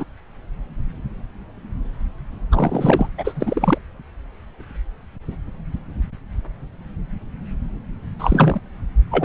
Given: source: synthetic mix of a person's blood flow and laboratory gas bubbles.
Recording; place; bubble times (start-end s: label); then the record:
Doppler ultrasound of blood flow; subclavian vein
0.00-0.04 s: bubbles
2.51-3.10 s: bubbles
3.18-3.78 s: bubbles
8.18-8.60 s: bubbles
9.11-9.25 s: bubbles
From the record:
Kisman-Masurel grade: 223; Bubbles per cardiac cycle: several, 3 to 8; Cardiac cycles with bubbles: 10 to 50%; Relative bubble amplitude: loud (0.450 to 0.775); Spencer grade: 2 (many but less than half of the cardiac periods contain bubble signals, singularly or in groups); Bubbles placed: anywhere in the cardiac cycle